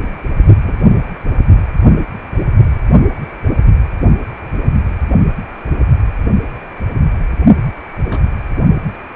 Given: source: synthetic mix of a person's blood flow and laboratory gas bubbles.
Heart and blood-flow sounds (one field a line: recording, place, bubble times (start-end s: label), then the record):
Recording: Doppler ultrasound of blood flow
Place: precordium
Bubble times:
0.64-0.80 s: bubbles
8.06-8.29 s: bubbles
From the record:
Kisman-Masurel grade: 121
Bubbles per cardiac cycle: 1 to 2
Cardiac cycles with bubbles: 10 to 50%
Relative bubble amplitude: barely perceptible (0.100 to 0.250)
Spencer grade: 2 (many but less than half of the cardiac periods contain bubble signals, singularly or in groups)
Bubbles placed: only in the low amplitude regions of the cardiac cycle